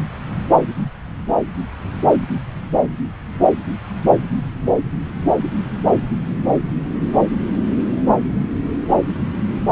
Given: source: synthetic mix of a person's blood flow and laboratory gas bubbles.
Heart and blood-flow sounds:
Doppler ultrasound of blood flow; subclavian vein
no bubbles
From the record:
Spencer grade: 0 (complete lack of bubble signals)

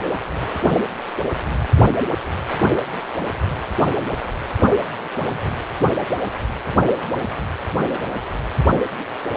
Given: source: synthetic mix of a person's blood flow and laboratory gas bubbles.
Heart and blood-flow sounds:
Doppler ultrasound of blood flow; precordium
no bubbles
From the record:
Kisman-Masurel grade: 000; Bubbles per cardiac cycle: 0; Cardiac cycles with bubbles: 0%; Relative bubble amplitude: no bubbles discernible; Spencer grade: 0 (complete lack of bubble signals)

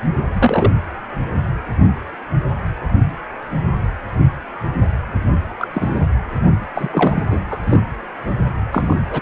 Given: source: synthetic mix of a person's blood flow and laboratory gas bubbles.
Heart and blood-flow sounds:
Doppler ultrasound of blood flow; precordium
0.35-0.73 s: bubbles
5.59-5.67 s: bubbles
5.74-6.06 s: bubbles
6.75-7.23 s: bubbles
7.29-7.40 s: bubbles
7.50-7.58 s: bubbles
7.66-7.83 s: bubbles
8.71-9.06 s: bubbles
9.10-9.21 s: bubbles
From the record:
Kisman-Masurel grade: 222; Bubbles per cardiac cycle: several, 3 to 8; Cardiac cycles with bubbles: 10 to 50%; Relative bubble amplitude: moderate (0.250 to 0.450); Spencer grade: 2 (many but less than half of the cardiac periods contain bubble signals, singularly or in groups); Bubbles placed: anywhere in the cardiac cycle

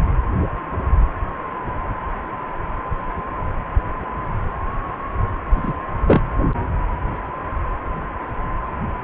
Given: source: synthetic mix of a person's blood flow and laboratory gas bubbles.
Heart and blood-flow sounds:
Doppler ultrasound of blood flow; precordium
5.56-5.72 s: bubbles
6.07-6.21 s: bubbles
From the record:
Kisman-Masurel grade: 113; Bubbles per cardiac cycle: 1 to 2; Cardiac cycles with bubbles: 1 to 10%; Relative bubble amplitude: loud (0.450 to 0.775); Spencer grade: 1 (occasional bubble signal discernible with the cardiac motion signal, with majority of cardiac periods free of bubbles); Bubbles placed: anywhere in the cardiac cycle

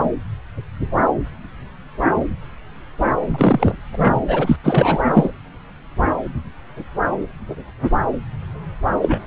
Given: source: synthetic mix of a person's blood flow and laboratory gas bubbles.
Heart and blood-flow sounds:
Doppler ultrasound of blood flow; subclavian vein
3.26-3.75 s: bubbles
3.92-4.21 s: bubbles
4.28-4.56 s: bubbles
4.64-5.04 s: bubbles
5.13-5.32 s: bubbles
9.01-9.21 s: bubbles
From the record:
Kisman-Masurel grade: 223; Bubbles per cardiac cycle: several, 3 to 8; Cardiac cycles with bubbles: 10 to 50%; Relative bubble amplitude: loud (0.450 to 0.775); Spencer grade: 2 (many but less than half of the cardiac periods contain bubble signals, singularly or in groups); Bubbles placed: anywhere in the cardiac cycle

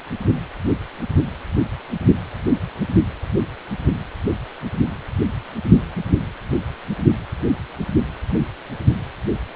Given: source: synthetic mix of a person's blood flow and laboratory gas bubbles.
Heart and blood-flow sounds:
Doppler ultrasound of blood flow; precordium
no bubbles
From the record:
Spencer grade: 0 (complete lack of bubble signals)

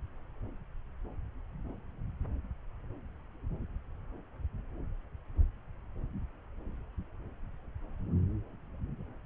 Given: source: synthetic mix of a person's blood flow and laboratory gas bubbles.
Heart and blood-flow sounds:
Doppler ultrasound of blood flow; subclavian vein
no bubbles
From the record:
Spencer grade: 0 (complete lack of bubble signals)

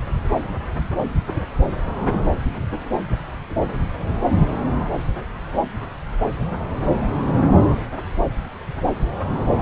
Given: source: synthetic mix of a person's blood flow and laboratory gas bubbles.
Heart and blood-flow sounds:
Doppler ultrasound of blood flow; subclavian vein
1.26-1.33 s: bubbles
2.12-2.23 s: bubbles
2.50-2.91 s: bubbles
3.50-3.55 s: bubbles
3.69-3.82 s: bubbles
From the record:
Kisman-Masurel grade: 121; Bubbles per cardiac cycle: 1 to 2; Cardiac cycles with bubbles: 10 to 50%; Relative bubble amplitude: barely perceptible (0.100 to 0.250); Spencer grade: 2 (many but less than half of the cardiac periods contain bubble signals, singularly or in groups); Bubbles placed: anywhere in the cardiac cycle

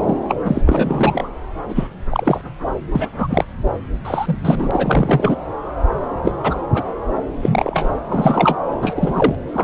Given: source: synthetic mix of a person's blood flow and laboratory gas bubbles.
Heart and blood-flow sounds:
Doppler ultrasound of blood flow; subclavian vein
0.06-0.17 s: bubbles
0.28-0.36 s: bubbles
0.45-0.62 s: bubbles
0.65-1.29 s: bubbles
1.69-1.88 s: bubbles
2.09-2.42 s: bubbles
2.95-3.06 s: bubbles
3.17-3.44 s: bubbles
4.05-5.36 s: bubbles
6.21-6.32 s: bubbles
6.42-6.58 s: bubbles
6.74-6.83 s: bubbles
7.42-7.89 s: bubbles
8.09-8.58 s: bubbles
8.71-8.76 s: bubbles
8.82-9.36 s: bubbles
9.53-9.64 s: bubbles
From the record:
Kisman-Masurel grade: 243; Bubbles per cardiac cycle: several, 3 to 8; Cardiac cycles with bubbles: 100%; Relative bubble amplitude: loud (0.450 to 0.775); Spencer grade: 3 (all of the cardiac periods contain showers or single bubble signals, but not dominating or overriding the cardiac motion signals); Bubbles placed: anywhere in the cardiac cycle

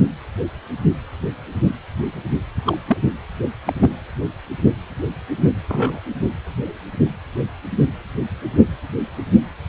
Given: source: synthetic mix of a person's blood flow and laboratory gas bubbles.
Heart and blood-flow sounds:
Doppler ultrasound of blood flow; precordium
2.65-2.77 s: bubbles
2.88-2.97 s: bubbles
3.65-3.73 s: bubbles
3.81-3.90 s: bubbles
5.68-6.01 s: bubbles
From the record:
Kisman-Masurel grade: 122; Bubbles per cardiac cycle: 1 to 2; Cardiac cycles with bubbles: 10 to 50%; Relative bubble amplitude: moderate (0.250 to 0.450); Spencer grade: 2 (many but less than half of the cardiac periods contain bubble signals, singularly or in groups); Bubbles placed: anywhere in the cardiac cycle

